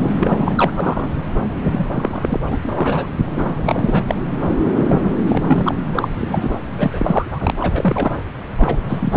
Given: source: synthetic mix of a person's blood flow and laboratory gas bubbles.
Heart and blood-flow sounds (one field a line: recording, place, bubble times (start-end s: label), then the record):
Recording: Doppler ultrasound of blood flow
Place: subclavian vein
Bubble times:
0.17-0.54 s: bubbles
0.56-0.72 s: bubbles
0.75-1.21 s: bubbles
1.71-1.86 s: bubbles
1.93-2.40 s: bubbles
2.49-3.09 s: bubbles
3.26-3.56 s: bubbles
3.65-4.03 s: bubbles
4.08-4.15 s: bubbles
4.78-4.86 s: bubbles
4.89-5.00 s: bubbles
5.03-5.14 s: bubbles
5.26-5.75 s: bubbles
5.95-6.10 s: bubbles
6.18-6.50 s: bubbles
6.78-7.28 s: bubbles
7.31-7.58 s: bubbles
7.60-8.17 s: bubbles
8.55-9.17 s: bubbles
From the record:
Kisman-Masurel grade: 343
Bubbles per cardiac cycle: rolling drumbeat, 9 or more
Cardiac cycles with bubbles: 100%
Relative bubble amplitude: loud (0.450 to 0.775)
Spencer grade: 3 (all of the cardiac periods contain showers or single bubble signals, but not dominating or overriding the cardiac motion signals)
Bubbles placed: anywhere in the cardiac cycle